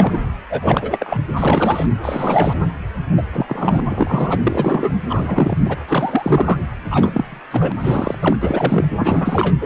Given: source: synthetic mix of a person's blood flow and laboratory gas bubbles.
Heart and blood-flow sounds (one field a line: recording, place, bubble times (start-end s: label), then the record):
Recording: Doppler ultrasound of blood flow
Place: precordium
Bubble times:
0.00-0.18 s: bubbles
0.50-1.17 s: bubbles
1.36-1.86 s: bubbles
2.01-2.54 s: bubbles
3.17-3.22 s: bubbles
3.32-3.80 s: bubbles
3.89-4.39 s: bubbles
4.43-4.93 s: bubbles
5.08-5.58 s: bubbles
5.65-5.77 s: bubbles
5.87-6.59 s: bubbles
6.90-7.40 s: bubbles
7.50-7.72 s: bubbles
7.79-8.15 s: bubbles
8.21-8.37 s: bubbles
8.41-8.85 s: bubbles
8.99-9.54 s: bubbles
9.61-9.66 s: bubbles
From the record:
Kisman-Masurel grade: 343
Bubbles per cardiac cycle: rolling drumbeat, 9 or more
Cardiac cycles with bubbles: 100%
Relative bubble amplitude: loud (0.450 to 0.775)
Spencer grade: 3 (all of the cardiac periods contain showers or single bubble signals, but not dominating or overriding the cardiac motion signals)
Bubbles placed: anywhere in the cardiac cycle